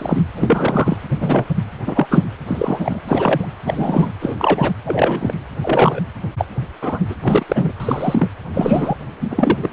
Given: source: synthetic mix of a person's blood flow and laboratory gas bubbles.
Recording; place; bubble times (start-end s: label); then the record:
Doppler ultrasound of blood flow; precordium
0.00-0.22 s: bubbles
0.37-0.97 s: bubbles
1.20-1.47 s: bubbles
1.86-2.07 s: bubbles
2.10-2.23 s: bubbles
2.46-3.00 s: bubbles
3.08-3.48 s: bubbles
3.65-4.08 s: bubbles
4.20-4.72 s: bubbles
4.86-5.34 s: bubbles
5.62-6.00 s: bubbles
6.38-6.46 s: bubbles
6.82-7.00 s: bubbles
7.08-7.13 s: bubbles
7.23-7.72 s: bubbles
7.80-8.27 s: bubbles
8.53-8.95 s: bubbles
9.20-9.27 s: bubbles
9.30-9.70 s: bubbles
From the record:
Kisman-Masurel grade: 243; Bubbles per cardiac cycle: several, 3 to 8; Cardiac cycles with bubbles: 100%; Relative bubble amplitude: loud (0.450 to 0.775); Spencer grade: 3 (all of the cardiac periods contain showers or single bubble signals, but not dominating or overriding the cardiac motion signals); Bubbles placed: anywhere in the cardiac cycle